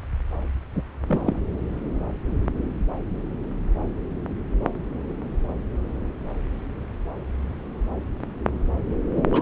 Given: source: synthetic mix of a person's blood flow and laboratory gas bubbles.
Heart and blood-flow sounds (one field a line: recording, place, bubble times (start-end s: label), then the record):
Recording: Doppler ultrasound of blood flow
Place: subclavian vein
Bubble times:
0.75-0.83 s: bubbles
1.06-1.21 s: bubbles
1.23-1.42 s: bubbles
9.16-9.22 s: bubbles
9.32-9.42 s: bubbles
From the record:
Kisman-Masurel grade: 223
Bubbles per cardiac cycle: several, 3 to 8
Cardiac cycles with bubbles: 10 to 50%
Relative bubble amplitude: loud (0.450 to 0.775)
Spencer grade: 2 (many but less than half of the cardiac periods contain bubble signals, singularly or in groups)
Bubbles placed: anywhere in the cardiac cycle